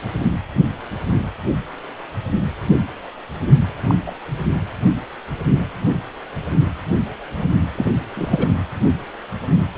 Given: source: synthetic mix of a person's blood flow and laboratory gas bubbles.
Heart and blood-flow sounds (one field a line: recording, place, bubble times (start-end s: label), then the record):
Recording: Doppler ultrasound of blood flow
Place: precordium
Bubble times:
3.87-3.95 s: bubbles
4.06-4.12 s: bubbles
4.38-4.52 s: bubbles
7.75-7.92 s: bubbles
8.16-8.53 s: bubbles
From the record:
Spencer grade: 2 (many but less than half of the cardiac periods contain bubble signals, singularly or in groups)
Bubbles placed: anywhere in the cardiac cycle